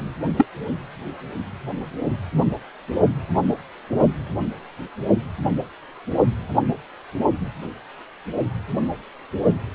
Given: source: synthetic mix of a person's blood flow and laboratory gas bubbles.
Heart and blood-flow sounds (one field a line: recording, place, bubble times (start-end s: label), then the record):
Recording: Doppler ultrasound of blood flow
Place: precordium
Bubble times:
0.38-0.46 s: bubbles
From the record:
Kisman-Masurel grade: 122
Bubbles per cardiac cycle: 1 to 2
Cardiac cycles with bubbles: 10 to 50%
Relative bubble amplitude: moderate (0.250 to 0.450)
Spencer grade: 2 (many but less than half of the cardiac periods contain bubble signals, singularly or in groups)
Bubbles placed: anywhere in the cardiac cycle